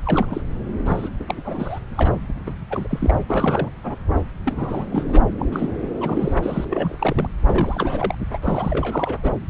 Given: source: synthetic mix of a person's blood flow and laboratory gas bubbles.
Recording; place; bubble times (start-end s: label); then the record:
Doppler ultrasound of blood flow; subclavian vein
0.06-0.41 s: bubbles
0.85-1.09 s: bubbles
1.19-1.79 s: bubbles
1.96-2.12 s: bubbles
2.28-2.33 s: bubbles
2.46-2.54 s: bubbles
2.70-2.87 s: bubbles
2.90-3.14 s: bubbles
3.29-3.73 s: bubbles
3.83-3.96 s: bubbles
4.45-4.85 s: bubbles
4.91-5.04 s: bubbles
5.12-5.21 s: bubbles
5.38-5.46 s: bubbles
5.52-5.88 s: bubbles
6.00-6.36 s: bubbles
6.42-6.65 s: bubbles
6.70-7.28 s: bubbles
7.42-8.15 s: bubbles
8.30-8.38 s: bubbles
8.42-9.34 s: bubbles
From the record:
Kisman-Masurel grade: 342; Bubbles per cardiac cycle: rolling drumbeat, 9 or more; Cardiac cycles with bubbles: 100%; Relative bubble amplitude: moderate (0.250 to 0.450); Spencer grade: 3 (all of the cardiac periods contain showers or single bubble signals, but not dominating or overriding the cardiac motion signals); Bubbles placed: anywhere in the cardiac cycle